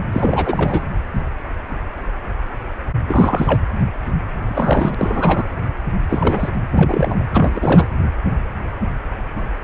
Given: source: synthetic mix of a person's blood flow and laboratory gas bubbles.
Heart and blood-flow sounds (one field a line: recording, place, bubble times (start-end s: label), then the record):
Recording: Doppler ultrasound of blood flow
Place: precordium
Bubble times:
0.12-0.83 s: bubbles
3.06-3.61 s: bubbles
4.46-4.94 s: bubbles
4.97-5.49 s: bubbles
6.09-6.50 s: bubbles
6.72-7.25 s: bubbles
7.33-7.86 s: bubbles
From the record:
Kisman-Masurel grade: 332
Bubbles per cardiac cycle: rolling drumbeat, 9 or more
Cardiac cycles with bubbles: 50 to 99%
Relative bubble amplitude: moderate (0.250 to 0.450)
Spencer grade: 3 (all of the cardiac periods contain showers or single bubble signals, but not dominating or overriding the cardiac motion signals)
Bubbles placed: anywhere in the cardiac cycle